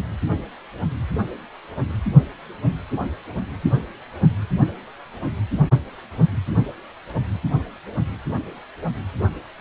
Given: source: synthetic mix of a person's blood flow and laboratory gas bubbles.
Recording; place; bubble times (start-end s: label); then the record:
Doppler ultrasound of blood flow; precordium
no bubbles
From the record:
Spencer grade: 0 (complete lack of bubble signals)